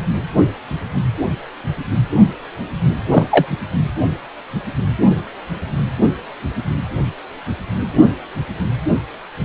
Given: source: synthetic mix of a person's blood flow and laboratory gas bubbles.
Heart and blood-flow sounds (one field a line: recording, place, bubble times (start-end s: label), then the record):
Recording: Doppler ultrasound of blood flow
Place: precordium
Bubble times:
3.06-3.26 s: bubbles
3.30-3.47 s: bubbles
From the record:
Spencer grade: 1 (occasional bubble signal discernible with the cardiac motion signal, with majority of cardiac periods free of bubbles)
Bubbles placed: anywhere in the cardiac cycle